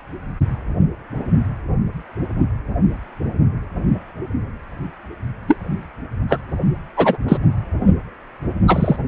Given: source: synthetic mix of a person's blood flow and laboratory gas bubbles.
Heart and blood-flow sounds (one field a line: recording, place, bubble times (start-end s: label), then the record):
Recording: Doppler ultrasound of blood flow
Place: precordium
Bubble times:
5.47-5.56 s: bubbles
6.29-6.40 s: bubbles
6.96-7.17 s: bubbles
7.28-7.38 s: bubbles
8.67-8.96 s: bubbles
From the record:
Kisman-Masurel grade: 123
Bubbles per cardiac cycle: 1 to 2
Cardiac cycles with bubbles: 10 to 50%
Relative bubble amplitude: loud (0.450 to 0.775)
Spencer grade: 2 (many but less than half of the cardiac periods contain bubble signals, singularly or in groups)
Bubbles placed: only in the low amplitude regions of the cardiac cycle